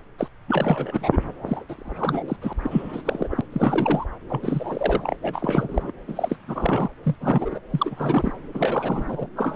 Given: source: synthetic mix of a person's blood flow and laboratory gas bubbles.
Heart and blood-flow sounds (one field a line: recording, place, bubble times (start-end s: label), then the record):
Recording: Doppler ultrasound of blood flow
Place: subclavian vein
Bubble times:
0.18-0.28 s: bubbles
0.48-1.18 s: bubbles
1.46-1.64 s: bubbles
1.69-1.75 s: bubbles
1.78-2.37 s: bubbles
2.42-2.53 s: bubbles
2.63-3.03 s: bubbles
3.05-3.28 s: bubbles
3.31-3.41 s: bubbles
3.52-4.04 s: bubbles
4.29-5.15 s: bubbles
5.22-5.92 s: bubbles
6.08-6.36 s: bubbles
6.47-6.88 s: bubbles
7.03-7.15 s: bubbles
7.21-7.58 s: bubbles
7.71-8.31 s: bubbles
8.54-9.27 s: bubbles
9.36-9.55 s: bubbles
From the record:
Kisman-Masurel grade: 342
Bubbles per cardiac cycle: rolling drumbeat, 9 or more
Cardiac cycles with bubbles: 100%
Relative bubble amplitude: moderate (0.250 to 0.450)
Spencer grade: 3 (all of the cardiac periods contain showers or single bubble signals, but not dominating or overriding the cardiac motion signals)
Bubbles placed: anywhere in the cardiac cycle